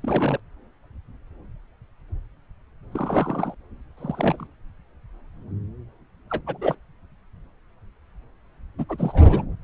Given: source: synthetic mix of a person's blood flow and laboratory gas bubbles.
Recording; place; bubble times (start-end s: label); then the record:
Doppler ultrasound of blood flow; subclavian vein
0.01-0.40 s: bubbles
2.91-3.54 s: bubbles
3.97-4.47 s: bubbles
6.29-6.44 s: bubbles
6.46-6.58 s: bubbles
6.61-6.75 s: bubbles
8.78-8.85 s: bubbles
8.88-9.43 s: bubbles
From the record:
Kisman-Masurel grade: 222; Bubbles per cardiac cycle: several, 3 to 8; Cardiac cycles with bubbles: 10 to 50%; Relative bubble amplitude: moderate (0.250 to 0.450); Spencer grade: 2 (many but less than half of the cardiac periods contain bubble signals, singularly or in groups); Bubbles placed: anywhere in the cardiac cycle